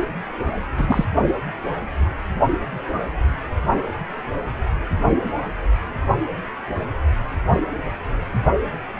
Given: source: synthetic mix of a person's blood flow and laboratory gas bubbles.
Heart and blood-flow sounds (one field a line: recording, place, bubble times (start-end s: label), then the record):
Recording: Doppler ultrasound of blood flow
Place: precordium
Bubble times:
0.77-1.04 s: bubbles
From the record:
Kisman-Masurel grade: 222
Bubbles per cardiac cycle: several, 3 to 8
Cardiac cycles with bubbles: 10 to 50%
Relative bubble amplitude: moderate (0.250 to 0.450)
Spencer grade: 2 (many but less than half of the cardiac periods contain bubble signals, singularly or in groups)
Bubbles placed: only in the low amplitude regions of the cardiac cycle